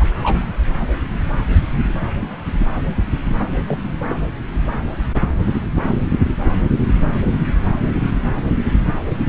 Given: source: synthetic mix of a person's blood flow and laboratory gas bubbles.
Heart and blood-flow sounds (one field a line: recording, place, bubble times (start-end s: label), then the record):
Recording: Doppler ultrasound of blood flow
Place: subclavian vein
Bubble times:
0.00-0.09 s: bubbles
0.22-0.42 s: bubbles
3.67-3.79 s: bubbles
4.07-4.15 s: bubbles
7.08-7.32 s: bubbles
From the record:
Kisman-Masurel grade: 122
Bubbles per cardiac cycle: 1 to 2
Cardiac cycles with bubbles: 10 to 50%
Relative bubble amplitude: moderate (0.250 to 0.450)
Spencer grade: 2 (many but less than half of the cardiac periods contain bubble signals, singularly or in groups)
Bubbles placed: anywhere in the cardiac cycle